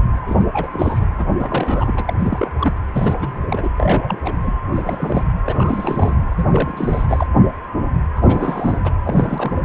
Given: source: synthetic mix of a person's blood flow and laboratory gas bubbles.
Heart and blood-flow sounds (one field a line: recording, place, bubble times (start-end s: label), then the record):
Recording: Doppler ultrasound of blood flow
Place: precordium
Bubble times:
0.27-0.46 s: bubbles
0.53-0.70 s: bubbles
0.73-1.06 s: bubbles
1.17-1.25 s: bubbles
1.39-1.94 s: bubbles
1.96-2.04 s: bubbles
2.08-2.13 s: bubbles
2.18-2.51 s: bubbles
2.57-2.74 s: bubbles
2.93-3.38 s: bubbles
3.48-3.69 s: bubbles
3.77-4.20 s: bubbles
4.25-4.33 s: bubbles
4.44-4.52 s: bubbles
4.72-5.25 s: bubbles
5.46-6.16 s: bubbles
6.36-7.27 s: bubbles
8.16-8.78 s: bubbles
8.84-8.92 s: bubbles
9.04-9.60 s: bubbles
From the record:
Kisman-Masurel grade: 332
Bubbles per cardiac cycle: rolling drumbeat, 9 or more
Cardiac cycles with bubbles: 50 to 99%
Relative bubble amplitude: moderate (0.250 to 0.450)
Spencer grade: 3 (all of the cardiac periods contain showers or single bubble signals, but not dominating or overriding the cardiac motion signals)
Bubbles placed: anywhere in the cardiac cycle